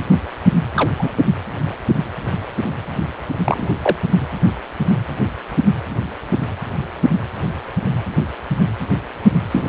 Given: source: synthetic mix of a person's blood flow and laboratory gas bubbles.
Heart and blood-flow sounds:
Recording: Doppler ultrasound of blood flow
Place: precordium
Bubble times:
0.74-0.89 s: bubbles
0.99-1.08 s: bubbles
3.44-3.74 s: bubbles
3.82-3.96 s: bubbles
9.51-9.69 s: bubbles
From the record:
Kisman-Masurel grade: 223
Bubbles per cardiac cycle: several, 3 to 8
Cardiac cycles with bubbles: 10 to 50%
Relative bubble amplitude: loud (0.450 to 0.775)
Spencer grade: 2 (many but less than half of the cardiac periods contain bubble signals, singularly or in groups)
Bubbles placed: anywhere in the cardiac cycle

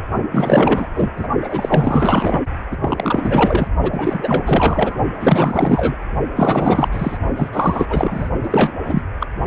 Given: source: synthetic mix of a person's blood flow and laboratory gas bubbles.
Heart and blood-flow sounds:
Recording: Doppler ultrasound of blood flow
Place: precordium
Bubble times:
0.31-1.10 s: bubbles
1.17-1.27 s: bubbles
1.41-2.40 s: bubbles
2.71-2.77 s: bubbles
2.81-3.67 s: bubbles
3.82-4.99 s: bubbles
5.19-5.96 s: bubbles
6.36-7.18 s: bubbles
7.35-7.50 s: bubbles
7.52-7.86 s: bubbles
7.90-8.30 s: bubbles
8.43-8.72 s: bubbles
8.84-9.01 s: bubbles
9.20-9.27 s: bubbles
From the record:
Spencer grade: 4 (maximum detectable bubble signal sounding continuously throughout systole and diastole of every cardiac period, and overriding the amplitude of the normal cardiac signals)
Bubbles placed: only in the low amplitude regions of the cardiac cycle

